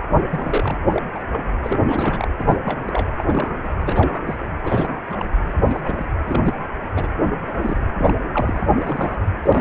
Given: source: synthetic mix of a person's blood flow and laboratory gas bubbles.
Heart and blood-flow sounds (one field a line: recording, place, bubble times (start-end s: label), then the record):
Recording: Doppler ultrasound of blood flow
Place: precordium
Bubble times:
0.10-0.75 s: bubbles
0.89-1.02 s: bubbles
1.14-1.23 s: bubbles
1.30-1.48 s: bubbles
1.63-1.81 s: bubbles
1.85-2.28 s: bubbles
2.38-2.44 s: bubbles
2.47-2.59 s: bubbles
2.65-2.81 s: bubbles
2.86-3.08 s: bubbles
3.18-3.24 s: bubbles
3.27-3.52 s: bubbles
3.62-3.69 s: bubbles
3.81-4.23 s: bubbles
4.27-4.38 s: bubbles
4.64-4.95 s: bubbles
5.09-5.26 s: bubbles
5.44-5.62 s: bubbles
5.68-5.80 s: bubbles
5.85-6.06 s: bubbles
6.26-6.54 s: bubbles
6.96-7.10 s: bubbles
7.26-7.32 s: bubbles
7.42-7.83 s: bubbles
7.99-8.14 s: bubbles
8.33-9.25 s: bubbles
9.43-9.61 s: bubbles
From the record:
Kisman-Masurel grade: 242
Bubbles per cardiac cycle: several, 3 to 8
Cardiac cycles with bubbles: 100%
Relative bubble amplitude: moderate (0.250 to 0.450)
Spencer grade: 3 (all of the cardiac periods contain showers or single bubble signals, but not dominating or overriding the cardiac motion signals)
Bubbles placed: anywhere in the cardiac cycle